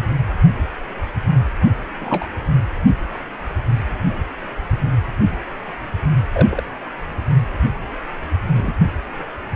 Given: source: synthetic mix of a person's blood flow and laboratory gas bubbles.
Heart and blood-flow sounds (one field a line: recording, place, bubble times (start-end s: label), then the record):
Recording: Doppler ultrasound of blood flow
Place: precordium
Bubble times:
2.00-2.28 s: bubbles
6.32-6.63 s: bubbles
8.54-8.73 s: bubbles
From the record:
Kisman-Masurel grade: 122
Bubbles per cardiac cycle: 1 to 2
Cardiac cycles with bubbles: 10 to 50%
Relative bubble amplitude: moderate (0.250 to 0.450)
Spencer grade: 2 (many but less than half of the cardiac periods contain bubble signals, singularly or in groups)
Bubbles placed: anywhere in the cardiac cycle